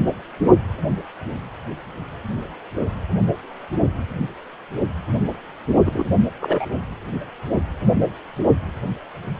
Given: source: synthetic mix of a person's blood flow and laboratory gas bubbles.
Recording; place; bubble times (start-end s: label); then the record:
Doppler ultrasound of blood flow; precordium
5.85-6.08 s: bubbles
6.40-6.65 s: bubbles
From the record:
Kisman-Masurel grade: 212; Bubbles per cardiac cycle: several, 3 to 8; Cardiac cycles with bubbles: 1 to 10%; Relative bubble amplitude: moderate (0.250 to 0.450); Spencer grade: 1 (occasional bubble signal discernible with the cardiac motion signal, with majority of cardiac periods free of bubbles); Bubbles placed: only in the low amplitude regions of the cardiac cycle